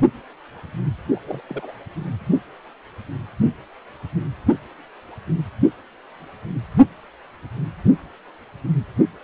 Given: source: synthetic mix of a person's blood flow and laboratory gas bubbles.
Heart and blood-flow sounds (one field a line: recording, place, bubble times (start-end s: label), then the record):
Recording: Doppler ultrasound of blood flow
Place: precordium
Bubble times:
1.14-1.19 s: bubbles
1.26-1.42 s: bubbles
1.48-1.72 s: bubbles
From the record:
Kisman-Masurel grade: 211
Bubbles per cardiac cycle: several, 3 to 8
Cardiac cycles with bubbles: 1 to 10%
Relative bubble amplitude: barely perceptible (0.100 to 0.250)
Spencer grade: 1 (occasional bubble signal discernible with the cardiac motion signal, with majority of cardiac periods free of bubbles)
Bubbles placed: anywhere in the cardiac cycle